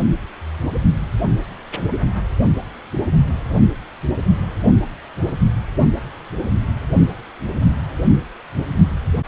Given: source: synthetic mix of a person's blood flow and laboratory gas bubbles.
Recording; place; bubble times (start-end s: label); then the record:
Doppler ultrasound of blood flow; precordium
9.25-9.28 s: bubbles
From the record:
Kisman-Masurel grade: 111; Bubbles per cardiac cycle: 1 to 2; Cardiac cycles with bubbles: 1 to 10%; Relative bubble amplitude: barely perceptible (0.100 to 0.250); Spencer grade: 1 (occasional bubble signal discernible with the cardiac motion signal, with majority of cardiac periods free of bubbles); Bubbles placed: only in the low amplitude regions of the cardiac cycle